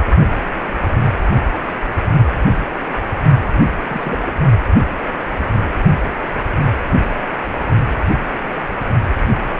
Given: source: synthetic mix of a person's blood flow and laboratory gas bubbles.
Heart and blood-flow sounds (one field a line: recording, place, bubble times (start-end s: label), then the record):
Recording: Doppler ultrasound of blood flow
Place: precordium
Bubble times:
3.89-4.16 s: bubbles
4.25-4.33 s: bubbles
From the record:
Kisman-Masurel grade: 211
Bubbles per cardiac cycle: several, 3 to 8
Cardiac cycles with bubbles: 1 to 10%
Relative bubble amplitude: barely perceptible (0.100 to 0.250)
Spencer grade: 1 (occasional bubble signal discernible with the cardiac motion signal, with majority of cardiac periods free of bubbles)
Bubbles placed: only in the low amplitude regions of the cardiac cycle